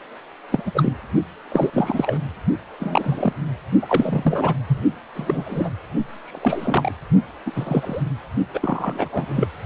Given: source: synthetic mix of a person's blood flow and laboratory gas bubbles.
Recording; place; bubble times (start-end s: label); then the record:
Doppler ultrasound of blood flow; precordium
0.52-0.62 s: bubbles
0.66-0.71 s: bubbles
0.74-0.93 s: bubbles
1.52-1.70 s: bubbles
1.73-2.19 s: bubbles
2.80-3.33 s: bubbles
3.82-4.54 s: bubbles
4.67-4.82 s: bubbles
5.14-5.70 s: bubbles
6.24-6.92 s: bubbles
7.46-8.03 s: bubbles
8.54-9.09 s: bubbles
9.12-9.51 s: bubbles
From the record:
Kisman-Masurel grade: 242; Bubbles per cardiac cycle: several, 3 to 8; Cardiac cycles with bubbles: 100%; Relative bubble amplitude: moderate (0.250 to 0.450); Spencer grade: 3 (all of the cardiac periods contain showers or single bubble signals, but not dominating or overriding the cardiac motion signals); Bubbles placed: only in the low amplitude regions of the cardiac cycle